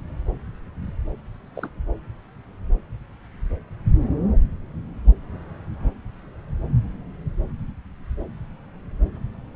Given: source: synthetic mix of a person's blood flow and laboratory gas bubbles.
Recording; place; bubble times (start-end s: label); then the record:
Doppler ultrasound of blood flow; subclavian vein
1.54-1.69 s: bubbles
From the record:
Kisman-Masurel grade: 211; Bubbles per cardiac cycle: several, 3 to 8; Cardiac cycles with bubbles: 1 to 10%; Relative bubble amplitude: barely perceptible (0.100 to 0.250); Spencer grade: 1 (occasional bubble signal discernible with the cardiac motion signal, with majority of cardiac periods free of bubbles); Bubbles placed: anywhere in the cardiac cycle